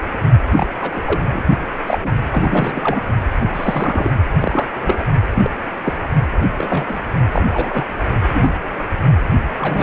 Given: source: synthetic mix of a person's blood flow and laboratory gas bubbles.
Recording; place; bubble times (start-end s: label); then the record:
Doppler ultrasound of blood flow; precordium
0.50-0.67 s: bubbles
0.80-1.01 s: bubbles
1.06-1.41 s: bubbles
1.87-1.98 s: bubbles
2.02-2.15 s: bubbles
2.30-3.00 s: bubbles
3.38-4.10 s: bubbles
4.41-4.67 s: bubbles
4.83-5.05 s: bubbles
5.34-5.50 s: bubbles
5.84-5.94 s: bubbles
6.58-7.00 s: bubbles
7.33-7.86 s: bubbles
8.33-8.54 s: bubbles
9.58-9.83 s: bubbles
From the record:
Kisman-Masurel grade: 242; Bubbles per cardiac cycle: several, 3 to 8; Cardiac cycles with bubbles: 100%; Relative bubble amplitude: moderate (0.250 to 0.450); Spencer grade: 3 (all of the cardiac periods contain showers or single bubble signals, but not dominating or overriding the cardiac motion signals); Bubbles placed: only in the low amplitude regions of the cardiac cycle